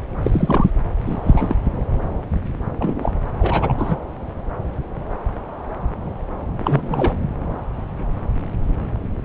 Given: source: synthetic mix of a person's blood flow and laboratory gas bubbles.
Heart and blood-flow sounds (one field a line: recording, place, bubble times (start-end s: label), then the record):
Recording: Doppler ultrasound of blood flow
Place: subclavian vein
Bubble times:
0.23-0.71 s: bubbles
1.05-1.56 s: bubbles
2.79-3.13 s: bubbles
3.39-3.98 s: bubbles
6.58-7.16 s: bubbles
From the record:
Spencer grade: 2 (many but less than half of the cardiac periods contain bubble signals, singularly or in groups)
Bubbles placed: anywhere in the cardiac cycle